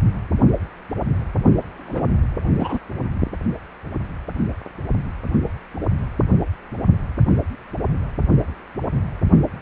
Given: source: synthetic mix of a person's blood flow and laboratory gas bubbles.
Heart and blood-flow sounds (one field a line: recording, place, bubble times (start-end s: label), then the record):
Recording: Doppler ultrasound of blood flow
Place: precordium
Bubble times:
1.86-2.12 s: bubbles
2.58-2.79 s: bubbles
From the record:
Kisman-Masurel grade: 212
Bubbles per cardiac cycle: several, 3 to 8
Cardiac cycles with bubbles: 1 to 10%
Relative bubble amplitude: moderate (0.250 to 0.450)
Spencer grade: 1 (occasional bubble signal discernible with the cardiac motion signal, with majority of cardiac periods free of bubbles)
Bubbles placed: only in the low amplitude regions of the cardiac cycle